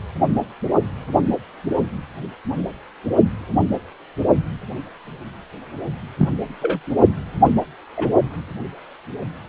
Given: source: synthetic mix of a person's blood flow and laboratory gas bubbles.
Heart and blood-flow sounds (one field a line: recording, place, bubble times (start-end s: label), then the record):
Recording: Doppler ultrasound of blood flow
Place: precordium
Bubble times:
6.17-6.29 s: bubbles
6.61-6.79 s: bubbles
7.43-7.50 s: bubbles
7.96-8.08 s: bubbles
From the record:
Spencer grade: 2 (many but less than half of the cardiac periods contain bubble signals, singularly or in groups)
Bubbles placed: only in the low amplitude regions of the cardiac cycle